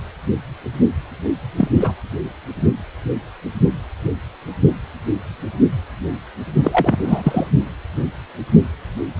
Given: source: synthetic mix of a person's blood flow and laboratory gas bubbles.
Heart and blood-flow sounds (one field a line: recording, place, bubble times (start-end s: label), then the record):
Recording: Doppler ultrasound of blood flow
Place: precordium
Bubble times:
1.56-1.68 s: bubbles
1.80-1.95 s: bubbles
6.63-7.01 s: bubbles
7.04-7.47 s: bubbles
From the record:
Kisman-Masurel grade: 213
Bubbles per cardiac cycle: several, 3 to 8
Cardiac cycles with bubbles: 1 to 10%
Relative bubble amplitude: loud (0.450 to 0.775)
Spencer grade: 1 (occasional bubble signal discernible with the cardiac motion signal, with majority of cardiac periods free of bubbles)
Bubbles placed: only in the low amplitude regions of the cardiac cycle